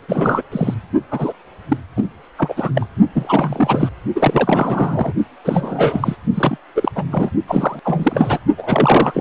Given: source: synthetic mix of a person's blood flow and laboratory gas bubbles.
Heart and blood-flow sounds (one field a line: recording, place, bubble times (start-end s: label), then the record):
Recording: Doppler ultrasound of blood flow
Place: precordium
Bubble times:
0.08-0.43 s: bubbles
0.52-0.74 s: bubbles
1.10-1.33 s: bubbles
1.69-1.77 s: bubbles
1.96-2.09 s: bubbles
2.38-2.71 s: bubbles
2.74-2.86 s: bubbles
3.13-3.89 s: bubbles
4.15-5.14 s: bubbles
5.44-6.17 s: bubbles
6.34-6.58 s: bubbles
6.75-6.92 s: bubbles
6.95-7.04 s: bubbles
7.11-7.31 s: bubbles
7.48-7.80 s: bubbles
7.84-8.38 s: bubbles
8.57-9.21 s: bubbles
From the record:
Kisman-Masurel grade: 343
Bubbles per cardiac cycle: rolling drumbeat, 9 or more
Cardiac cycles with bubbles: 100%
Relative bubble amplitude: loud (0.450 to 0.775)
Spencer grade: 3 (all of the cardiac periods contain showers or single bubble signals, but not dominating or overriding the cardiac motion signals)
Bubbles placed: only in the low amplitude regions of the cardiac cycle